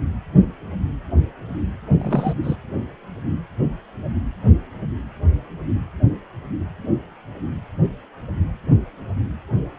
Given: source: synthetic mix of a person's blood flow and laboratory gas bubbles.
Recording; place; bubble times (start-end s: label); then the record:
Doppler ultrasound of blood flow; precordium
1.99-2.34 s: bubbles
2.44-2.56 s: bubbles
From the record:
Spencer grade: 1 (occasional bubble signal discernible with the cardiac motion signal, with majority of cardiac periods free of bubbles); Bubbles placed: only in the low amplitude regions of the cardiac cycle